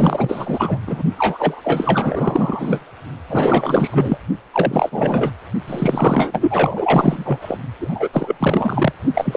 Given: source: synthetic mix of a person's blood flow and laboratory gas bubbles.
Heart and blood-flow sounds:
Doppler ultrasound of blood flow; precordium
0.00-0.78 s: bubbles
0.86-1.03 s: bubbles
1.17-2.82 s: bubbles
3.29-4.17 s: bubbles
4.53-5.31 s: bubbles
5.67-7.57 s: bubbles
7.79-8.08 s: bubbles
8.12-8.92 s: bubbles
9.13-9.37 s: bubbles
From the record:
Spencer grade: 4 (maximum detectable bubble signal sounding continuously throughout systole and diastole of every cardiac period, and overriding the amplitude of the normal cardiac signals); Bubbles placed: only in the low amplitude regions of the cardiac cycle

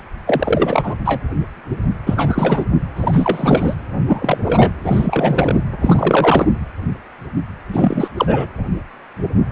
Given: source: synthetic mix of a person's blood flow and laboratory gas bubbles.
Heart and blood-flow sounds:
Doppler ultrasound of blood flow; precordium
0.28-0.95 s: bubbles
1.05-1.22 s: bubbles
2.06-2.65 s: bubbles
2.96-3.75 s: bubbles
4.04-4.72 s: bubbles
4.83-5.62 s: bubbles
5.80-6.53 s: bubbles
7.68-8.08 s: bubbles
8.16-8.47 s: bubbles
From the record:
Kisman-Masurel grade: 333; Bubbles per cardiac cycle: rolling drumbeat, 9 or more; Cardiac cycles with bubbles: 50 to 99%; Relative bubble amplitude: loud (0.450 to 0.775); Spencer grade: 3 (all of the cardiac periods contain showers or single bubble signals, but not dominating or overriding the cardiac motion signals); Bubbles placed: anywhere in the cardiac cycle

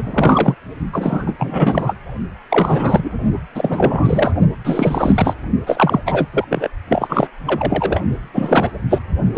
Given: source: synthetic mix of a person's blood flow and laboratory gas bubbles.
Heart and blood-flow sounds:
Doppler ultrasound of blood flow; precordium
0.00-0.54 s: bubbles
0.93-1.34 s: bubbles
1.38-1.95 s: bubbles
2.50-3.12 s: bubbles
3.54-4.35 s: bubbles
4.64-5.36 s: bubbles
5.67-6.01 s: bubbles
6.05-6.26 s: bubbles
6.33-6.45 s: bubbles
6.50-6.68 s: bubbles
6.88-7.27 s: bubbles
7.45-8.01 s: bubbles
8.34-8.71 s: bubbles
8.89-8.99 s: bubbles
9.33-9.38 s: bubbles
From the record:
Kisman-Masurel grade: 343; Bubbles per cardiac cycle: rolling drumbeat, 9 or more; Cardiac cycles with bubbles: 100%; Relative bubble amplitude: loud (0.450 to 0.775); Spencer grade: 3 (all of the cardiac periods contain showers or single bubble signals, but not dominating or overriding the cardiac motion signals); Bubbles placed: only in the low amplitude regions of the cardiac cycle

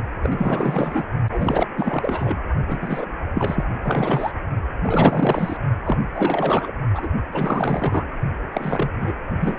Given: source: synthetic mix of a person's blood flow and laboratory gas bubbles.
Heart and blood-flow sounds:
Doppler ultrasound of blood flow; precordium
0.23-1.06 s: bubbles
1.32-1.68 s: bubbles
1.77-2.38 s: bubbles
2.67-3.06 s: bubbles
3.34-3.65 s: bubbles
3.79-4.31 s: bubbles
4.83-5.56 s: bubbles
5.85-5.97 s: bubbles
6.14-6.72 s: bubbles
6.93-7.08 s: bubbles
7.31-8.04 s: bubbles
8.53-8.89 s: bubbles
9.00-9.12 s: bubbles
9.40-9.56 s: bubbles
From the record:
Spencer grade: 4 (maximum detectable bubble signal sounding continuously throughout systole and diastole of every cardiac period, and overriding the amplitude of the normal cardiac signals); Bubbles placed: only in the low amplitude regions of the cardiac cycle

